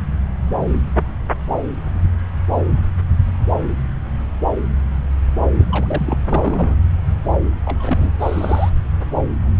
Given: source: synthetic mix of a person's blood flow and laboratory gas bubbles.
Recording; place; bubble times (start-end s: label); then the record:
Doppler ultrasound of blood flow; subclavian vein
5.53-6.17 s: bubbles
6.29-6.81 s: bubbles
7.65-8.15 s: bubbles
8.19-8.70 s: bubbles
From the record:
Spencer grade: 2 (many but less than half of the cardiac periods contain bubble signals, singularly or in groups); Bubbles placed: anywhere in the cardiac cycle